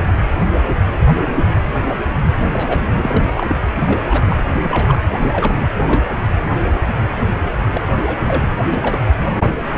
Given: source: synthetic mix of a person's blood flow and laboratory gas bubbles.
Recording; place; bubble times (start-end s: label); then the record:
Doppler ultrasound of blood flow; precordium
2.53-2.80 s: bubbles
2.95-3.25 s: bubbles
3.33-3.56 s: bubbles
3.86-4.25 s: bubbles
4.30-4.51 s: bubbles
4.56-4.59 s: bubbles
4.63-5.02 s: bubbles
5.32-5.66 s: bubbles
5.87-6.04 s: bubbles
7.71-7.82 s: bubbles
8.06-8.17 s: bubbles
8.26-8.48 s: bubbles
8.70-9.10 s: bubbles
From the record:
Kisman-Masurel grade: 222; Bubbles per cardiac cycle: several, 3 to 8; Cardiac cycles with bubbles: 10 to 50%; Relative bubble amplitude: moderate (0.250 to 0.450); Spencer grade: 2 (many but less than half of the cardiac periods contain bubble signals, singularly or in groups); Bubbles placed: anywhere in the cardiac cycle